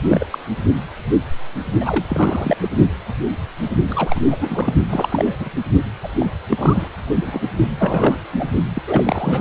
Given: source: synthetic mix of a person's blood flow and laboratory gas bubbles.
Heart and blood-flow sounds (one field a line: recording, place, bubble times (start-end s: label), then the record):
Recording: Doppler ultrasound of blood flow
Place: precordium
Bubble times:
0.03-0.24 s: bubbles
0.32-0.38 s: bubbles
1.80-2.57 s: bubbles
2.61-2.69 s: bubbles
3.87-4.75 s: bubbles
4.89-5.36 s: bubbles
5.39-5.50 s: bubbles
6.02-6.08 s: bubbles
6.19-6.29 s: bubbles
6.48-6.88 s: bubbles
7.00-7.47 s: bubbles
7.79-8.19 s: bubbles
8.32-8.49 s: bubbles
8.75-8.82 s: bubbles
8.87-9.41 s: bubbles
From the record:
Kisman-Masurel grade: 332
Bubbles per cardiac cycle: rolling drumbeat, 9 or more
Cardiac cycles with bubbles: 50 to 99%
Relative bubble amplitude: moderate (0.250 to 0.450)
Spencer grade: 3 (all of the cardiac periods contain showers or single bubble signals, but not dominating or overriding the cardiac motion signals)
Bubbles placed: only in the low amplitude regions of the cardiac cycle